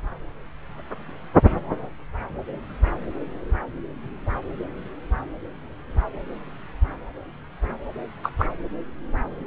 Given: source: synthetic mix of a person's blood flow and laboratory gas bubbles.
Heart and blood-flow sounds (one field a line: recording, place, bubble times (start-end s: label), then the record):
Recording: Doppler ultrasound of blood flow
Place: subclavian vein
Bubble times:
8.23-8.31 s: bubbles
8.38-8.46 s: bubbles
From the record:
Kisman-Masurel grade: 112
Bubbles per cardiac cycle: 1 to 2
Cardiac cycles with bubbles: 1 to 10%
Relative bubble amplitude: moderate (0.250 to 0.450)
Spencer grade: 1 (occasional bubble signal discernible with the cardiac motion signal, with majority of cardiac periods free of bubbles)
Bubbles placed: anywhere in the cardiac cycle